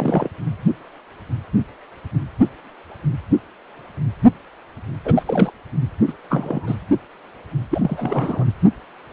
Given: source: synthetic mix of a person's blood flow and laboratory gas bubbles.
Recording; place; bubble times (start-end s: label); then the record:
Doppler ultrasound of blood flow; precordium
0.00-0.28 s: bubbles
5.05-5.23 s: bubbles
5.26-5.54 s: bubbles
6.07-6.13 s: bubbles
6.29-6.75 s: bubbles
7.71-8.45 s: bubbles
From the record:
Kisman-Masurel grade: 222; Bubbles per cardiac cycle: several, 3 to 8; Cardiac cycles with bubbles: 10 to 50%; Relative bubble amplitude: moderate (0.250 to 0.450); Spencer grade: 2 (many but less than half of the cardiac periods contain bubble signals, singularly or in groups); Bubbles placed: anywhere in the cardiac cycle